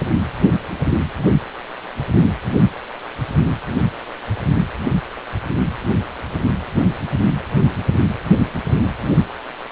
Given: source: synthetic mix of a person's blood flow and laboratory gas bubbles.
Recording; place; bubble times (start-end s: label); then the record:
Doppler ultrasound of blood flow; precordium
no bubbles
From the record:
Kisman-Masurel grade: 000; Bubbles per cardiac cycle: 0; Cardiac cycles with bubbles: 0%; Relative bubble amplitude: no bubbles discernible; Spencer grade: 0 (complete lack of bubble signals)